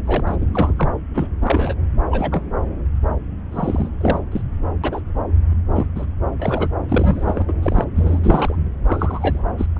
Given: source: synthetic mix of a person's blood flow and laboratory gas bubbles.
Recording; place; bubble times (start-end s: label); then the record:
Doppler ultrasound of blood flow; subclavian vein
0.05-0.37 s: bubbles
0.40-0.46 s: bubbles
0.53-0.73 s: bubbles
0.76-0.89 s: bubbles
1.14-1.27 s: bubbles
1.41-1.76 s: bubbles
2.10-2.51 s: bubbles
3.52-3.89 s: bubbles
4.00-4.19 s: bubbles
4.31-4.42 s: bubbles
4.83-5.00 s: bubbles
5.74-5.86 s: bubbles
5.95-6.06 s: bubbles
6.39-6.68 s: bubbles
6.88-7.54 s: bubbles
7.62-7.84 s: bubbles
7.95-8.20 s: bubbles
8.24-8.55 s: bubbles
8.86-9.44 s: bubbles
9.58-9.67 s: bubbles
9.76-9.80 s: bubbles
From the record:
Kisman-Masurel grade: 242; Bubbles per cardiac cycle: several, 3 to 8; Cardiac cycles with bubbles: 100%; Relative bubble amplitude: moderate (0.250 to 0.450); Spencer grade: 3 (all of the cardiac periods contain showers or single bubble signals, but not dominating or overriding the cardiac motion signals); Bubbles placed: anywhere in the cardiac cycle